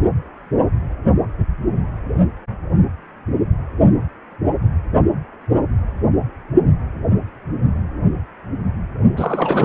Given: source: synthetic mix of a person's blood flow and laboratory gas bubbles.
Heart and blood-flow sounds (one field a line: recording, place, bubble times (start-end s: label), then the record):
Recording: Doppler ultrasound of blood flow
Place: precordium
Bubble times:
9.17-9.65 s: bubbles
From the record:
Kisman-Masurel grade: 213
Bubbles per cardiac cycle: several, 3 to 8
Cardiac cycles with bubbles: 1 to 10%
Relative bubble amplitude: loud (0.450 to 0.775)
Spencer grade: 1 (occasional bubble signal discernible with the cardiac motion signal, with majority of cardiac periods free of bubbles)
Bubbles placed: only in the low amplitude regions of the cardiac cycle